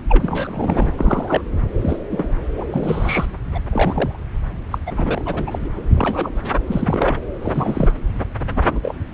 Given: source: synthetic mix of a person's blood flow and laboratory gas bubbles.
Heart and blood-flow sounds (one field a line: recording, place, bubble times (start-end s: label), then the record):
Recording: Doppler ultrasound of blood flow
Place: subclavian vein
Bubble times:
0.09-0.91 s: bubbles
0.96-1.41 s: bubbles
1.81-1.97 s: bubbles
2.10-2.29 s: bubbles
2.57-2.64 s: bubbles
2.71-3.27 s: bubbles
3.54-3.59 s: bubbles
3.72-4.19 s: bubbles
4.71-4.78 s: bubbles
4.86-5.22 s: bubbles
5.25-5.44 s: bubbles
5.46-5.69 s: bubbles
5.94-6.30 s: bubbles
6.67-7.17 s: bubbles
7.42-7.91 s: bubbles
8.55-8.61 s: bubbles
8.64-8.79 s: bubbles
8.82-8.95 s: bubbles
From the record:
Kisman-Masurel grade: 242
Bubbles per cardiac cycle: several, 3 to 8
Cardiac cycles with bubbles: 100%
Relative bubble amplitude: moderate (0.250 to 0.450)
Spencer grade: 3 (all of the cardiac periods contain showers or single bubble signals, but not dominating or overriding the cardiac motion signals)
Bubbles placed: anywhere in the cardiac cycle